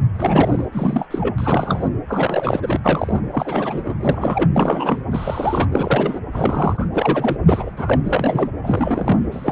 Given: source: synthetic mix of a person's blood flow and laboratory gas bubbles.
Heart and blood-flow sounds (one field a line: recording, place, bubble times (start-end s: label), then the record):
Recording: Doppler ultrasound of blood flow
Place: precordium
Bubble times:
0.15-0.66 s: bubbles
0.72-1.07 s: bubbles
1.10-1.92 s: bubbles
2.08-2.80 s: bubbles
2.83-3.21 s: bubbles
3.31-3.95 s: bubbles
4.00-4.50 s: bubbles
4.55-5.02 s: bubbles
5.11-5.67 s: bubbles
5.72-6.20 s: bubbles
6.33-6.88 s: bubbles
6.92-7.37 s: bubbles
7.46-8.01 s: bubbles
8.04-8.51 s: bubbles
8.63-9.24 s: bubbles
9.30-9.52 s: bubbles
From the record:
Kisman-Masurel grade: 343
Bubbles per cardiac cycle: rolling drumbeat, 9 or more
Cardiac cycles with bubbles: 100%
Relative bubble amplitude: loud (0.450 to 0.775)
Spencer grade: 3 (all of the cardiac periods contain showers or single bubble signals, but not dominating or overriding the cardiac motion signals)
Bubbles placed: anywhere in the cardiac cycle